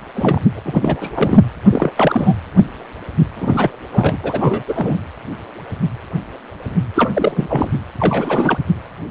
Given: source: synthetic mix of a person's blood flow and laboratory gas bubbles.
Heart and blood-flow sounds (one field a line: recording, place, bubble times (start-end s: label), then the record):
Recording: Doppler ultrasound of blood flow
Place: precordium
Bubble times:
0.15-0.40 s: bubbles
0.43-0.59 s: bubbles
0.64-1.42 s: bubbles
1.71-1.90 s: bubbles
1.96-2.34 s: bubbles
3.36-3.71 s: bubbles
3.91-4.17 s: bubbles
4.22-4.63 s: bubbles
4.67-5.00 s: bubbles
6.95-7.10 s: bubbles
7.13-7.68 s: bubbles
8.00-8.58 s: bubbles
From the record:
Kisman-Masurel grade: 333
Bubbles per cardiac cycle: rolling drumbeat, 9 or more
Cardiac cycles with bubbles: 50 to 99%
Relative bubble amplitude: loud (0.450 to 0.775)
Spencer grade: 3 (all of the cardiac periods contain showers or single bubble signals, but not dominating or overriding the cardiac motion signals)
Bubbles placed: anywhere in the cardiac cycle